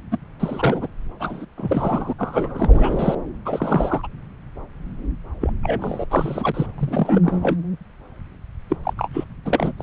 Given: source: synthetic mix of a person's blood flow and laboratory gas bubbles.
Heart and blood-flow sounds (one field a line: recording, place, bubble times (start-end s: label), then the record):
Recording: Doppler ultrasound of blood flow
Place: subclavian vein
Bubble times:
0.11-0.18 s: bubbles
0.40-0.88 s: bubbles
1.20-1.46 s: bubbles
1.57-2.13 s: bubbles
2.19-3.15 s: bubbles
3.45-4.07 s: bubbles
5.41-5.53 s: bubbles
5.62-6.05 s: bubbles
6.10-6.66 s: bubbles
6.78-7.57 s: bubbles
8.70-8.77 s: bubbles
8.84-8.94 s: bubbles
8.97-9.09 s: bubbles
9.13-9.25 s: bubbles
9.45-9.72 s: bubbles
9.77-9.83 s: bubbles
From the record:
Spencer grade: 3 (all of the cardiac periods contain showers or single bubble signals, but not dominating or overriding the cardiac motion signals)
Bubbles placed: anywhere in the cardiac cycle